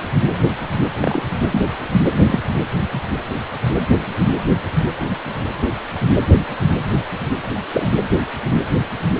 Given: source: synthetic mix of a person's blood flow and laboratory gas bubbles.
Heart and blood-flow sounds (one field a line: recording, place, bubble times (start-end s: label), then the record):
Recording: Doppler ultrasound of blood flow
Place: precordium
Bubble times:
1.00-1.23 s: bubbles
1.52-1.67 s: bubbles
2.12-2.20 s: bubbles
2.24-2.39 s: bubbles
2.94-2.99 s: bubbles
7.74-7.86 s: bubbles
From the record:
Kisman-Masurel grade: 122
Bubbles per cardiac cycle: 1 to 2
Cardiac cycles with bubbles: 10 to 50%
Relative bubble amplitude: moderate (0.250 to 0.450)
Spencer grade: 2 (many but less than half of the cardiac periods contain bubble signals, singularly or in groups)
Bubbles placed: anywhere in the cardiac cycle